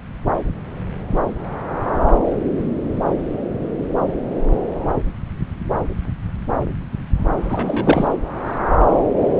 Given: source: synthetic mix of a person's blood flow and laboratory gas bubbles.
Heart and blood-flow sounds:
Doppler ultrasound of blood flow; subclavian vein
7.50-8.08 s: bubbles
From the record:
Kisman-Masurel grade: 213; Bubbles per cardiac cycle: several, 3 to 8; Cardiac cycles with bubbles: 1 to 10%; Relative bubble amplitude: loud (0.450 to 0.775); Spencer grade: 1 (occasional bubble signal discernible with the cardiac motion signal, with majority of cardiac periods free of bubbles); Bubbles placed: anywhere in the cardiac cycle

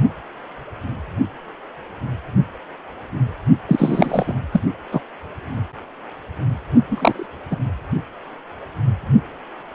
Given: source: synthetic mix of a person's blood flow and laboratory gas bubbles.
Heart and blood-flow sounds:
Doppler ultrasound of blood flow; precordium
3.68-4.34 s: bubbles
4.53-4.61 s: bubbles
4.92-5.01 s: bubbles
6.91-7.26 s: bubbles
7.50-7.57 s: bubbles
From the record:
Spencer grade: 2 (many but less than half of the cardiac periods contain bubble signals, singularly or in groups); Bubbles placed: only in the low amplitude regions of the cardiac cycle

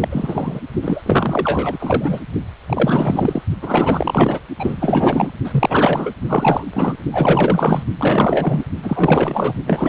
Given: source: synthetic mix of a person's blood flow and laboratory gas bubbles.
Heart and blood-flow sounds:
Doppler ultrasound of blood flow; precordium
0.00-0.60 s: bubbles
0.81-1.01 s: bubbles
1.05-2.21 s: bubbles
2.67-3.42 s: bubbles
3.61-4.40 s: bubbles
4.59-5.30 s: bubbles
5.44-6.15 s: bubbles
6.28-6.64 s: bubbles
6.73-6.98 s: bubbles
7.12-7.83 s: bubbles
7.98-8.64 s: bubbles
8.83-9.54 s: bubbles
9.67-9.88 s: bubbles
From the record:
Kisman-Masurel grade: 444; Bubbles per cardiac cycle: continuous sound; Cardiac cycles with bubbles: 100%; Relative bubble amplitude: maximal (0.775 to 0.999); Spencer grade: 4 (maximum detectable bubble signal sounding continuously throughout systole and diastole of every cardiac period, and overriding the amplitude of the normal cardiac signals); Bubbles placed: only in the low amplitude regions of the cardiac cycle

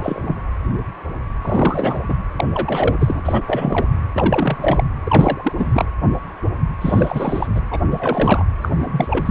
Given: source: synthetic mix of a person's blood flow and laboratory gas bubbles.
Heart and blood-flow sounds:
Doppler ultrasound of blood flow; precordium
0.00-0.40 s: bubbles
1.42-2.00 s: bubbles
2.08-2.14 s: bubbles
2.36-2.45 s: bubbles
2.53-3.42 s: bubbles
3.47-3.87 s: bubbles
4.13-4.57 s: bubbles
4.61-4.84 s: bubbles
5.04-5.52 s: bubbles
5.57-5.85 s: bubbles
6.80-7.47 s: bubbles
7.54-7.61 s: bubbles
7.71-7.79 s: bubbles
7.88-8.46 s: bubbles
8.62-8.69 s: bubbles
8.79-9.31 s: bubbles
From the record:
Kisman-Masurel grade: 333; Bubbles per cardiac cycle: rolling drumbeat, 9 or more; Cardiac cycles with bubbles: 50 to 99%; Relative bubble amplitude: loud (0.450 to 0.775); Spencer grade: 3 (all of the cardiac periods contain showers or single bubble signals, but not dominating or overriding the cardiac motion signals); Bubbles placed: anywhere in the cardiac cycle

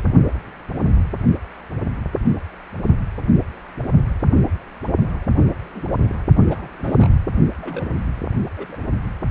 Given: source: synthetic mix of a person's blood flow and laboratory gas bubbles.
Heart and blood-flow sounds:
Doppler ultrasound of blood flow; precordium
5.38-5.45 s: bubbles
5.56-5.71 s: bubbles
5.75-5.84 s: bubbles
5.97-6.19 s: bubbles
6.49-6.70 s: bubbles
6.79-7.08 s: bubbles
7.58-7.88 s: bubbles
7.96-8.02 s: bubbles
8.57-8.66 s: bubbles
8.69-8.76 s: bubbles
From the record:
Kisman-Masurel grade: 221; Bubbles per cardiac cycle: several, 3 to 8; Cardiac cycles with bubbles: 10 to 50%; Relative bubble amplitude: barely perceptible (0.100 to 0.250); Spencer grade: 2 (many but less than half of the cardiac periods contain bubble signals, singularly or in groups); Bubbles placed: only in the low amplitude regions of the cardiac cycle

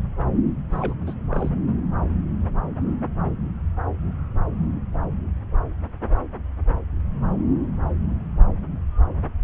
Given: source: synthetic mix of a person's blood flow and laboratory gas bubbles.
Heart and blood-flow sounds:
Doppler ultrasound of blood flow; subclavian vein
0.70-0.94 s: bubbles
1.06-1.14 s: bubbles
1.30-1.49 s: bubbles
From the record:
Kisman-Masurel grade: 212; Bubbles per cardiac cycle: several, 3 to 8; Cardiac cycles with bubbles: 1 to 10%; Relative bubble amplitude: moderate (0.250 to 0.450); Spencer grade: 1 (occasional bubble signal discernible with the cardiac motion signal, with majority of cardiac periods free of bubbles); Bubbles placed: anywhere in the cardiac cycle

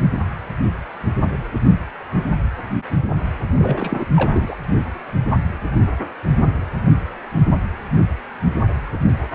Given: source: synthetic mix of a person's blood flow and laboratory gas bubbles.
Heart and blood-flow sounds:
Doppler ultrasound of blood flow; precordium
3.57-4.06 s: bubbles
4.16-4.55 s: bubbles
From the record:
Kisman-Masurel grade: 212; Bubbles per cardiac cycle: several, 3 to 8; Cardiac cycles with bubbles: 1 to 10%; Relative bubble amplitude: moderate (0.250 to 0.450); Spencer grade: 1 (occasional bubble signal discernible with the cardiac motion signal, with majority of cardiac periods free of bubbles); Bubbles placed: anywhere in the cardiac cycle

